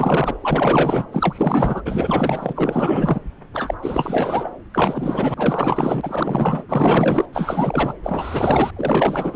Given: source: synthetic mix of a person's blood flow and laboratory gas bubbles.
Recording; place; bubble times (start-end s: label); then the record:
Doppler ultrasound of blood flow; subclavian vein
0.00-0.38 s: bubbles
0.40-1.06 s: bubbles
1.12-1.82 s: bubbles
1.85-3.19 s: bubbles
3.53-3.74 s: bubbles
3.81-4.50 s: bubbles
4.74-5.34 s: bubbles
5.37-6.64 s: bubbles
6.69-7.25 s: bubbles
7.33-7.94 s: bubbles
8.03-8.71 s: bubbles
8.76-9.36 s: bubbles
From the record:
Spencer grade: 4 (maximum detectable bubble signal sounding continuously throughout systole and diastole of every cardiac period, and overriding the amplitude of the normal cardiac signals); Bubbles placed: anywhere in the cardiac cycle